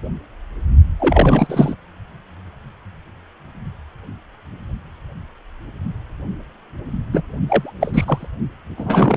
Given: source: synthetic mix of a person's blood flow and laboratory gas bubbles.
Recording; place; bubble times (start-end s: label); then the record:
Doppler ultrasound of blood flow; precordium
0.99-1.75 s: bubbles
7.13-7.22 s: bubbles
7.47-7.72 s: bubbles
7.80-8.26 s: bubbles
8.77-9.17 s: bubbles
From the record:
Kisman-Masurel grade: 223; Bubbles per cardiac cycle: several, 3 to 8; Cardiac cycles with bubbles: 10 to 50%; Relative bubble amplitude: loud (0.450 to 0.775); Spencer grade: 2 (many but less than half of the cardiac periods contain bubble signals, singularly or in groups); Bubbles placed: only in the low amplitude regions of the cardiac cycle